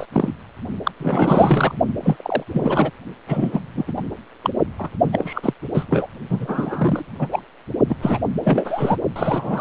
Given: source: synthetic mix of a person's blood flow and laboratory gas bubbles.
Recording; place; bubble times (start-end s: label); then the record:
Doppler ultrasound of blood flow; precordium
0.00-0.06 s: bubbles
0.12-0.33 s: bubbles
0.83-0.92 s: bubbles
1.00-1.73 s: bubbles
2.02-2.44 s: bubbles
2.53-2.90 s: bubbles
3.26-3.60 s: bubbles
3.74-3.93 s: bubbles
3.96-4.04 s: bubbles
4.43-4.50 s: bubbles
4.79-4.90 s: bubbles
5.12-5.54 s: bubbles
5.74-5.86 s: bubbles
5.89-6.08 s: bubbles
6.29-7.04 s: bubbles
7.18-7.28 s: bubbles
7.32-7.42 s: bubbles
7.89-7.96 s: bubbles
8.02-8.20 s: bubbles
8.41-8.96 s: bubbles
9.16-9.61 s: bubbles
From the record:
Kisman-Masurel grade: 343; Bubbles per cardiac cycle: rolling drumbeat, 9 or more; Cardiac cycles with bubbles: 100%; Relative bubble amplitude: loud (0.450 to 0.775); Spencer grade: 3 (all of the cardiac periods contain showers or single bubble signals, but not dominating or overriding the cardiac motion signals); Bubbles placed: only in the low amplitude regions of the cardiac cycle